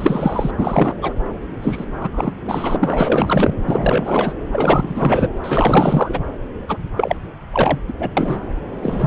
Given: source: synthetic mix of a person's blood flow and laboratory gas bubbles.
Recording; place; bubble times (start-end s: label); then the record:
Doppler ultrasound of blood flow; subclavian vein
0.00-0.51 s: bubbles
0.58-0.95 s: bubbles
1.01-1.14 s: bubbles
1.62-1.84 s: bubbles
2.00-2.09 s: bubbles
2.12-2.33 s: bubbles
2.45-2.76 s: bubbles
2.80-3.54 s: bubbles
3.65-4.35 s: bubbles
4.52-5.29 s: bubbles
5.44-6.19 s: bubbles
6.68-6.78 s: bubbles
6.96-7.16 s: bubbles
7.53-7.79 s: bubbles
7.87-7.93 s: bubbles
8.00-8.11 s: bubbles
8.16-8.48 s: bubbles
8.82-9.07 s: bubbles
From the record:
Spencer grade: 4 (maximum detectable bubble signal sounding continuously throughout systole and diastole of every cardiac period, and overriding the amplitude of the normal cardiac signals); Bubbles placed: anywhere in the cardiac cycle